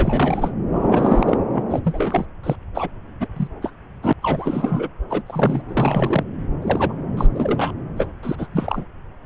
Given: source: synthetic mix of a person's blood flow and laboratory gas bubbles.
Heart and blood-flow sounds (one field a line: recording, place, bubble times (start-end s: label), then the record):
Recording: Doppler ultrasound of blood flow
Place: subclavian vein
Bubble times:
0.00-0.51 s: bubbles
0.72-1.38 s: bubbles
1.52-1.63 s: bubbles
1.70-1.80 s: bubbles
1.84-2.25 s: bubbles
2.43-2.55 s: bubbles
2.75-2.88 s: bubbles
3.20-3.27 s: bubbles
3.36-3.47 s: bubbles
3.62-3.71 s: bubbles
4.02-4.13 s: bubbles
4.22-4.88 s: bubbles
5.09-5.22 s: bubbles
5.26-5.62 s: bubbles
5.68-6.23 s: bubbles
6.61-6.93 s: bubbles
7.17-7.26 s: bubbles
7.30-7.71 s: bubbles
7.96-8.06 s: bubbles
8.23-8.36 s: bubbles
8.38-8.47 s: bubbles
8.53-8.84 s: bubbles
From the record:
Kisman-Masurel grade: 242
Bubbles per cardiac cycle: several, 3 to 8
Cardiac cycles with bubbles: 100%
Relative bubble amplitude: moderate (0.250 to 0.450)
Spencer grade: 3 (all of the cardiac periods contain showers or single bubble signals, but not dominating or overriding the cardiac motion signals)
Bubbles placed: anywhere in the cardiac cycle